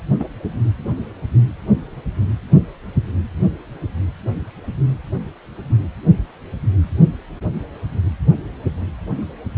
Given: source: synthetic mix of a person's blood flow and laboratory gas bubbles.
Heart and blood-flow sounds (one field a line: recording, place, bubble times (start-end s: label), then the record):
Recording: Doppler ultrasound of blood flow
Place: precordium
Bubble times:
0.19-0.28 s: bubbles
From the record:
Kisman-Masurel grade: 113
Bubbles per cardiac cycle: 1 to 2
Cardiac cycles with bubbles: 1 to 10%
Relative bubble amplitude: loud (0.450 to 0.775)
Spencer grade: 1 (occasional bubble signal discernible with the cardiac motion signal, with majority of cardiac periods free of bubbles)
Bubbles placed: anywhere in the cardiac cycle